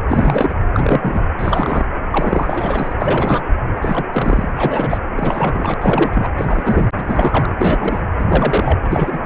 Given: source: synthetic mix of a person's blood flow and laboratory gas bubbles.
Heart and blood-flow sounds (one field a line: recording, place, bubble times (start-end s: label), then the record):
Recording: Doppler ultrasound of blood flow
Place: precordium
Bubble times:
0.08-0.54 s: bubbles
0.73-1.23 s: bubbles
1.39-1.85 s: bubbles
2.10-2.94 s: bubbles
3.00-3.42 s: bubbles
3.75-4.05 s: bubbles
4.12-4.47 s: bubbles
4.51-4.53 s: bubbles
4.55-4.98 s: bubbles
5.14-5.74 s: bubbles
5.81-6.28 s: bubbles
6.37-6.89 s: bubbles
6.96-7.55 s: bubbles
7.58-8.03 s: bubbles
8.19-8.80 s: bubbles
8.84-9.19 s: bubbles
From the record:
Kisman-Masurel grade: 332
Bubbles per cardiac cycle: rolling drumbeat, 9 or more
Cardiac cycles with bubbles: 50 to 99%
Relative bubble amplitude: moderate (0.250 to 0.450)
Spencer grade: 3 (all of the cardiac periods contain showers or single bubble signals, but not dominating or overriding the cardiac motion signals)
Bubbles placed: anywhere in the cardiac cycle